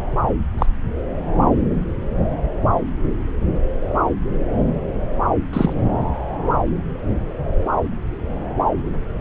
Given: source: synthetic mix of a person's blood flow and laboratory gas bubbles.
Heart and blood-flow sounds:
Doppler ultrasound of blood flow; subclavian vein
0.58-0.66 s: bubbles
5.53-5.73 s: bubbles
From the record:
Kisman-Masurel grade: 123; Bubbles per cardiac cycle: 1 to 2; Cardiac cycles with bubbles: 10 to 50%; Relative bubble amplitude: loud (0.450 to 0.775); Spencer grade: 2 (many but less than half of the cardiac periods contain bubble signals, singularly or in groups); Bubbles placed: anywhere in the cardiac cycle

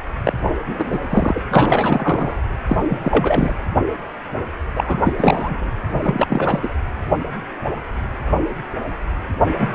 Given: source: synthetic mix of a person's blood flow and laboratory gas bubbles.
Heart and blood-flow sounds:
Doppler ultrasound of blood flow; precordium
0.24-0.33 s: bubbles
0.66-0.99 s: bubbles
1.09-1.40 s: bubbles
1.50-2.36 s: bubbles
2.66-2.83 s: bubbles
2.88-2.98 s: bubbles
3.02-3.54 s: bubbles
4.75-5.13 s: bubbles
5.17-5.71 s: bubbles
6.02-6.71 s: bubbles
9.59-9.69 s: bubbles
From the record:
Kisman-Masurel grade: 333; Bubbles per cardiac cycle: rolling drumbeat, 9 or more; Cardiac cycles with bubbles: 50 to 99%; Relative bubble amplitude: loud (0.450 to 0.775); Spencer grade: 3 (all of the cardiac periods contain showers or single bubble signals, but not dominating or overriding the cardiac motion signals); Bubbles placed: anywhere in the cardiac cycle

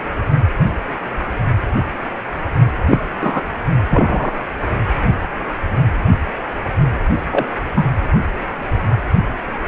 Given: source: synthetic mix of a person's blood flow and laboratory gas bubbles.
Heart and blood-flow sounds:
Doppler ultrasound of blood flow; precordium
2.88-2.98 s: bubbles
3.21-3.42 s: bubbles
3.90-4.32 s: bubbles
7.30-7.46 s: bubbles
7.75-7.86 s: bubbles
From the record:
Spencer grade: 2 (many but less than half of the cardiac periods contain bubble signals, singularly or in groups); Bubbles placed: only in the low amplitude regions of the cardiac cycle

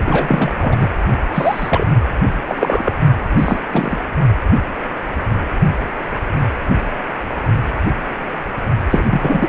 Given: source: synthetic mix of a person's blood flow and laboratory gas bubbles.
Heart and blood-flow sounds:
Doppler ultrasound of blood flow; precordium
0.05-0.76 s: bubbles
0.79-0.89 s: bubbles
1.34-1.92 s: bubbles
2.47-2.92 s: bubbles
3.37-3.62 s: bubbles
3.72-3.98 s: bubbles
8.90-9.04 s: bubbles
9.10-9.49 s: bubbles
From the record:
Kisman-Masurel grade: 223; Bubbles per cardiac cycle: several, 3 to 8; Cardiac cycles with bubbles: 10 to 50%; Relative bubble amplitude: loud (0.450 to 0.775); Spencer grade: 2 (many but less than half of the cardiac periods contain bubble signals, singularly or in groups); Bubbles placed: only in the low amplitude regions of the cardiac cycle

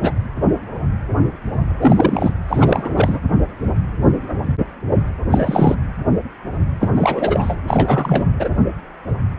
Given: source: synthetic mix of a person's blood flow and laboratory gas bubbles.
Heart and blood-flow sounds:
Doppler ultrasound of blood flow; precordium
0.00-0.12 s: bubbles
1.81-2.35 s: bubbles
2.48-2.90 s: bubbles
2.95-3.18 s: bubbles
5.30-5.74 s: bubbles
6.80-6.89 s: bubbles
6.95-7.56 s: bubbles
7.67-8.25 s: bubbles
8.39-8.49 s: bubbles
From the record:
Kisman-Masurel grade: 333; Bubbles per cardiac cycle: rolling drumbeat, 9 or more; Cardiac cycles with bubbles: 50 to 99%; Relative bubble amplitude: loud (0.450 to 0.775); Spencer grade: 3 (all of the cardiac periods contain showers or single bubble signals, but not dominating or overriding the cardiac motion signals); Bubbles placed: anywhere in the cardiac cycle

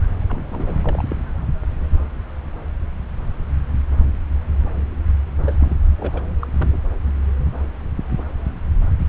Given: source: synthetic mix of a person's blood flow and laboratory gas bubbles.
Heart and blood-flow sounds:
Doppler ultrasound of blood flow; subclavian vein
0.22-0.25 s: bubbles
0.28-1.16 s: bubbles
5.42-5.56 s: bubbles
5.58-5.75 s: bubbles
5.86-5.93 s: bubbles
5.96-6.23 s: bubbles
6.42-6.46 s: bubbles
6.57-6.78 s: bubbles
From the record:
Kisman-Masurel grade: 221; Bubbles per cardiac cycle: several, 3 to 8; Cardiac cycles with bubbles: 10 to 50%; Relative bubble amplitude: barely perceptible (0.100 to 0.250); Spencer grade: 2 (many but less than half of the cardiac periods contain bubble signals, singularly or in groups); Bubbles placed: anywhere in the cardiac cycle

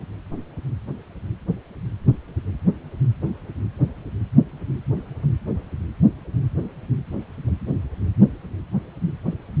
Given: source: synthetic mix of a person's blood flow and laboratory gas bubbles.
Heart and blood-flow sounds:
Doppler ultrasound of blood flow; precordium
no bubbles
From the record:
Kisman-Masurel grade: 000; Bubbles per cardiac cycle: 0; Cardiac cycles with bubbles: 0%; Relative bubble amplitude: no bubbles discernible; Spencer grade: 0 (complete lack of bubble signals)

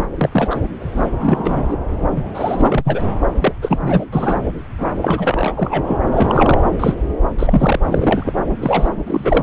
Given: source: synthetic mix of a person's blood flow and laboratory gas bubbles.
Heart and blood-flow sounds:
Doppler ultrasound of blood flow; subclavian vein
0.00-0.05 s: bubbles
0.15-0.61 s: bubbles
0.93-1.07 s: bubbles
1.20-1.77 s: bubbles
2.16-2.23 s: bubbles
2.34-3.03 s: bubbles
3.41-3.53 s: bubbles
3.62-4.05 s: bubbles
4.12-4.50 s: bubbles
4.78-4.87 s: bubbles
5.01-5.53 s: bubbles
5.57-5.97 s: bubbles
6.12-6.59 s: bubbles
6.79-6.95 s: bubbles
7.38-7.79 s: bubbles
7.85-8.32 s: bubbles
8.61-8.90 s: bubbles
9.06-9.43 s: bubbles
From the record:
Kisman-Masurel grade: 243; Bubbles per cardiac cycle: several, 3 to 8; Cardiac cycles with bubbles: 100%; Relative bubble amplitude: loud (0.450 to 0.775); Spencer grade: 3 (all of the cardiac periods contain showers or single bubble signals, but not dominating or overriding the cardiac motion signals); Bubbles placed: anywhere in the cardiac cycle

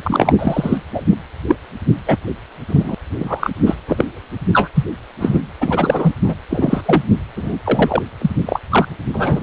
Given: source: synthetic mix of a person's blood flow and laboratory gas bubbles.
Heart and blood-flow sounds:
Doppler ultrasound of blood flow; precordium
0.03-0.35 s: bubbles
0.38-0.78 s: bubbles
0.94-1.03 s: bubbles
1.13-1.16 s: bubbles
1.47-1.56 s: bubbles
2.06-2.17 s: bubbles
2.68-2.94 s: bubbles
3.18-3.51 s: bubbles
3.65-3.75 s: bubbles
3.88-4.04 s: bubbles
4.52-4.68 s: bubbles
4.75-4.84 s: bubbles
5.19-5.41 s: bubbles
5.60-6.14 s: bubbles
6.22-6.35 s: bubbles
6.50-7.04 s: bubbles
7.36-7.56 s: bubbles
7.64-8.02 s: bubbles
8.21-8.31 s: bubbles
8.46-8.60 s: bubbles
8.71-8.88 s: bubbles
9.13-9.43 s: bubbles
From the record:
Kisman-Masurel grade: 243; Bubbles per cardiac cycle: several, 3 to 8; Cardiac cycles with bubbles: 100%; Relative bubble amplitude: loud (0.450 to 0.775); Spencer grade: 3 (all of the cardiac periods contain showers or single bubble signals, but not dominating or overriding the cardiac motion signals); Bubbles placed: anywhere in the cardiac cycle

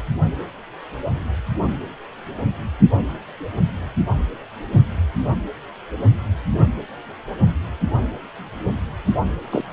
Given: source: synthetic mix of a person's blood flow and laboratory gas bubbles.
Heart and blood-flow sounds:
Doppler ultrasound of blood flow; precordium
9.52-9.63 s: bubbles
From the record:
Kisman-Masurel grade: 113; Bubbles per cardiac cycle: 1 to 2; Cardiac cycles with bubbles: 1 to 10%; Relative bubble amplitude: loud (0.450 to 0.775); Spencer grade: 1 (occasional bubble signal discernible with the cardiac motion signal, with majority of cardiac periods free of bubbles); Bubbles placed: only in the low amplitude regions of the cardiac cycle

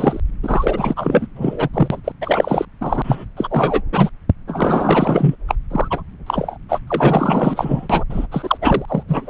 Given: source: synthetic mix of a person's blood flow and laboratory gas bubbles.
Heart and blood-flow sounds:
Doppler ultrasound of blood flow; subclavian vein
0.00-0.20 s: bubbles
0.42-1.27 s: bubbles
1.35-1.69 s: bubbles
1.73-2.00 s: bubbles
2.04-2.12 s: bubbles
2.21-2.65 s: bubbles
2.81-3.25 s: bubbles
3.36-3.82 s: bubbles
3.92-4.09 s: bubbles
4.47-5.35 s: bubbles
5.47-5.55 s: bubbles
5.70-6.02 s: bubbles
6.26-6.58 s: bubbles
6.68-6.79 s: bubbles
6.87-8.04 s: bubbles
8.10-8.27 s: bubbles
8.31-8.58 s: bubbles
8.61-9.03 s: bubbles
9.08-9.30 s: bubbles
From the record:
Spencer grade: 4 (maximum detectable bubble signal sounding continuously throughout systole and diastole of every cardiac period, and overriding the amplitude of the normal cardiac signals); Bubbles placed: anywhere in the cardiac cycle

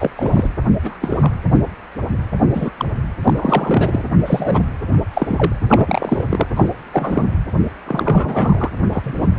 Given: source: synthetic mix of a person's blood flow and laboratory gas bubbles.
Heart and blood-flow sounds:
Doppler ultrasound of blood flow; precordium
0.00-0.10 s: bubbles
0.16-0.48 s: bubbles
0.84-0.98 s: bubbles
1.02-1.37 s: bubbles
2.54-2.71 s: bubbles
2.77-2.85 s: bubbles
3.24-3.33 s: bubbles
3.36-4.01 s: bubbles
4.25-4.61 s: bubbles
5.13-5.53 s: bubbles
5.70-6.46 s: bubbles
6.56-6.70 s: bubbles
6.93-7.23 s: bubbles
7.86-8.72 s: bubbles
8.93-9.27 s: bubbles
From the record:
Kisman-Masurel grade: 232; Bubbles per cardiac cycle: several, 3 to 8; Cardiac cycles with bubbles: 50 to 99%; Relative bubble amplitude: moderate (0.250 to 0.450); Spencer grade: 3 (all of the cardiac periods contain showers or single bubble signals, but not dominating or overriding the cardiac motion signals); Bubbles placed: anywhere in the cardiac cycle

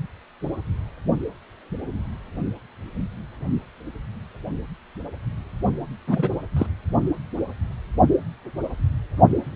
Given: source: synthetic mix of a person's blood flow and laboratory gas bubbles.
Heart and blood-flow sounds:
Doppler ultrasound of blood flow; precordium
6.07-6.29 s: bubbles
6.56-6.67 s: bubbles
From the record:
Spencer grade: 2 (many but less than half of the cardiac periods contain bubble signals, singularly or in groups); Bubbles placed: only in the low amplitude regions of the cardiac cycle

